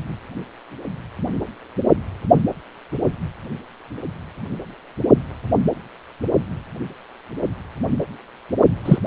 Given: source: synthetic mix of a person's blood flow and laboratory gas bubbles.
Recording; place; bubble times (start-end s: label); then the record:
Doppler ultrasound of blood flow; precordium
8.85-8.98 s: bubbles
From the record:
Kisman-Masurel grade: 113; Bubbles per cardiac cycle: 1 to 2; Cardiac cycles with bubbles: 1 to 10%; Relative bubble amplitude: loud (0.450 to 0.775); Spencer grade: 1 (occasional bubble signal discernible with the cardiac motion signal, with majority of cardiac periods free of bubbles); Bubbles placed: only in the low amplitude regions of the cardiac cycle